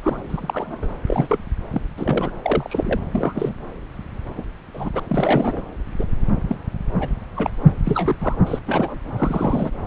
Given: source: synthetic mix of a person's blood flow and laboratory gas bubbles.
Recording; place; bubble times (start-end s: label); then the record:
Doppler ultrasound of blood flow; subclavian vein
0.03-0.19 s: bubbles
0.29-0.88 s: bubbles
1.06-1.39 s: bubbles
1.72-1.81 s: bubbles
1.96-2.31 s: bubbles
2.44-2.99 s: bubbles
3.11-3.52 s: bubbles
4.37-4.43 s: bubbles
4.74-4.89 s: bubbles
4.95-5.00 s: bubbles
5.09-5.62 s: bubbles
5.99-6.06 s: bubbles
6.43-6.56 s: bubbles
7.00-7.08 s: bubbles
7.24-7.25 s: bubbles
7.35-7.50 s: bubbles
7.83-8.16 s: bubbles
8.21-8.35 s: bubbles
8.47-8.59 s: bubbles
8.67-8.99 s: bubbles
9.17-9.71 s: bubbles
From the record:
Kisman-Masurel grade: 242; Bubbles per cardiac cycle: several, 3 to 8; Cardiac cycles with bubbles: 100%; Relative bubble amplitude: moderate (0.250 to 0.450); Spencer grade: 3 (all of the cardiac periods contain showers or single bubble signals, but not dominating or overriding the cardiac motion signals); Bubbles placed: anywhere in the cardiac cycle